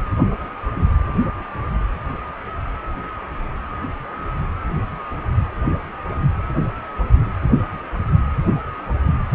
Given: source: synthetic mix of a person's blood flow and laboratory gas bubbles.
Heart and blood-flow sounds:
Doppler ultrasound of blood flow; precordium
no bubbles
From the record:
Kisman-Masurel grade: 000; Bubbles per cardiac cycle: 0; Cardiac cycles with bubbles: 0%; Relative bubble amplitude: no bubbles discernible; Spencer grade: 0 (complete lack of bubble signals)

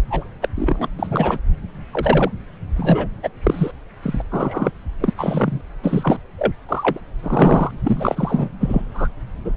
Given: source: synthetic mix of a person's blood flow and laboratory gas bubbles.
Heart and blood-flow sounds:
Doppler ultrasound of blood flow; subclavian vein
0.10-0.29 s: bubbles
0.41-0.48 s: bubbles
0.56-0.88 s: bubbles
0.98-1.38 s: bubbles
1.92-2.31 s: bubbles
2.75-3.07 s: bubbles
3.23-3.28 s: bubbles
3.43-3.71 s: bubbles
4.02-4.22 s: bubbles
4.31-4.71 s: bubbles
5.00-5.14 s: bubbles
5.18-5.61 s: bubbles
5.83-6.19 s: bubbles
6.38-6.52 s: bubbles
6.69-6.99 s: bubbles
7.23-7.71 s: bubbles
7.84-8.49 s: bubbles
8.61-8.82 s: bubbles
8.94-9.08 s: bubbles
9.45-9.51 s: bubbles
From the record:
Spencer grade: 3 (all of the cardiac periods contain showers or single bubble signals, but not dominating or overriding the cardiac motion signals); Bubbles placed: anywhere in the cardiac cycle

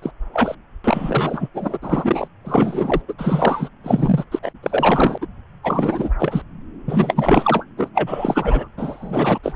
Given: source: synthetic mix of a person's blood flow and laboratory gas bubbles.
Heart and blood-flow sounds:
Doppler ultrasound of blood flow; subclavian vein
0.02-0.11 s: bubbles
0.33-0.55 s: bubbles
0.84-1.49 s: bubbles
1.54-1.78 s: bubbles
1.82-2.27 s: bubbles
2.44-3.01 s: bubbles
3.08-3.13 s: bubbles
3.18-3.68 s: bubbles
3.83-4.25 s: bubbles
4.31-4.39 s: bubbles
4.42-4.51 s: bubbles
4.62-5.18 s: bubbles
5.21-5.26 s: bubbles
5.63-6.10 s: bubbles
6.19-6.42 s: bubbles
6.87-7.65 s: bubbles
7.77-7.89 s: bubbles
7.94-8.68 s: bubbles
8.77-9.39 s: bubbles
9.43-9.54 s: bubbles
From the record:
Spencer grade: 4 (maximum detectable bubble signal sounding continuously throughout systole and diastole of every cardiac period, and overriding the amplitude of the normal cardiac signals); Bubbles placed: anywhere in the cardiac cycle

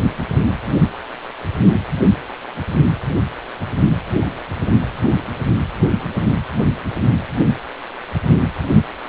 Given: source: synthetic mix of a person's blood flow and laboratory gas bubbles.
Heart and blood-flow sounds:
Doppler ultrasound of blood flow; precordium
8.72-8.82 s: bubbles
From the record:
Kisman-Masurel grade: 113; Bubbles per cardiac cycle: 1 to 2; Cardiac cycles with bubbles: 1 to 10%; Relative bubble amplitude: loud (0.450 to 0.775); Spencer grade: 1 (occasional bubble signal discernible with the cardiac motion signal, with majority of cardiac periods free of bubbles); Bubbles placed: anywhere in the cardiac cycle

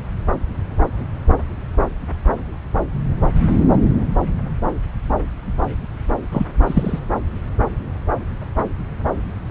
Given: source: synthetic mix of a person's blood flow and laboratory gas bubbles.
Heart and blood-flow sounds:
Doppler ultrasound of blood flow; subclavian vein
6.31-6.46 s: bubbles
6.67-7.00 s: bubbles
From the record:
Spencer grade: 2 (many but less than half of the cardiac periods contain bubble signals, singularly or in groups); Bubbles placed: anywhere in the cardiac cycle

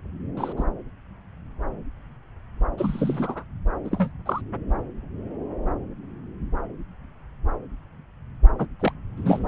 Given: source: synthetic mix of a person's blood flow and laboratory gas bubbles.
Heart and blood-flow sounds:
Doppler ultrasound of blood flow; subclavian vein
0.37-0.52 s: bubbles
0.56-0.64 s: bubbles
2.77-3.44 s: bubbles
3.84-4.12 s: bubbles
4.25-4.42 s: bubbles
8.59-8.66 s: bubbles
8.79-8.93 s: bubbles
9.16-9.48 s: bubbles
From the record:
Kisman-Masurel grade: 222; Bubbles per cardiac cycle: several, 3 to 8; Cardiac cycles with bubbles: 10 to 50%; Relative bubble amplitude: moderate (0.250 to 0.450); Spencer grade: 2 (many but less than half of the cardiac periods contain bubble signals, singularly or in groups); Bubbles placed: anywhere in the cardiac cycle

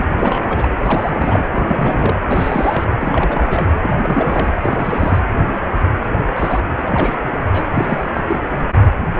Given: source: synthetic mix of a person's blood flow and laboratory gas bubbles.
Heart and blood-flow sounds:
Doppler ultrasound of blood flow; precordium
0.00-0.05 s: bubbles
0.17-0.78 s: bubbles
0.83-1.45 s: bubbles
1.54-2.18 s: bubbles
2.27-2.85 s: bubbles
3.00-3.67 s: bubbles
3.81-4.53 s: bubbles
4.61-5.19 s: bubbles
6.36-6.61 s: bubbles
6.67-7.17 s: bubbles
7.52-7.68 s: bubbles
7.72-8.11 s: bubbles
8.13-8.23 s: bubbles
8.27-8.40 s: bubbles
From the record:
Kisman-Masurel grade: 332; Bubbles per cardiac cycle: rolling drumbeat, 9 or more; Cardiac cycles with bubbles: 50 to 99%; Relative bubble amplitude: moderate (0.250 to 0.450); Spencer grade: 3 (all of the cardiac periods contain showers or single bubble signals, but not dominating or overriding the cardiac motion signals); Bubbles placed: anywhere in the cardiac cycle

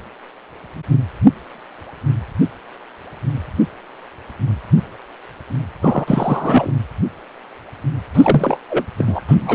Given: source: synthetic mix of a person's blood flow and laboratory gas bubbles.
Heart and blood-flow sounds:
Doppler ultrasound of blood flow; precordium
5.82-6.73 s: bubbles
8.13-8.57 s: bubbles
8.70-8.85 s: bubbles
8.98-9.21 s: bubbles
9.29-9.35 s: bubbles
9.40-9.55 s: bubbles
From the record:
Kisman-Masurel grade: 223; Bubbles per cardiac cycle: several, 3 to 8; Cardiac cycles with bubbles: 10 to 50%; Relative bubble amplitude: loud (0.450 to 0.775); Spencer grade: 2 (many but less than half of the cardiac periods contain bubble signals, singularly or in groups); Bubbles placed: anywhere in the cardiac cycle

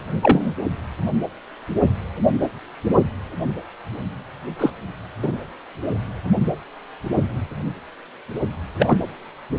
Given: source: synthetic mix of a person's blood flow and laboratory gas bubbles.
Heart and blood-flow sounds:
Doppler ultrasound of blood flow; precordium
0.22-0.53 s: bubbles
4.58-4.71 s: bubbles
5.22-5.33 s: bubbles
8.79-8.98 s: bubbles
From the record:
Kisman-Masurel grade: 123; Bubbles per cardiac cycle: 1 to 2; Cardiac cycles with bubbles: 10 to 50%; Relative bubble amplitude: loud (0.450 to 0.775); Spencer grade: 2 (many but less than half of the cardiac periods contain bubble signals, singularly or in groups); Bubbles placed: only in the low amplitude regions of the cardiac cycle

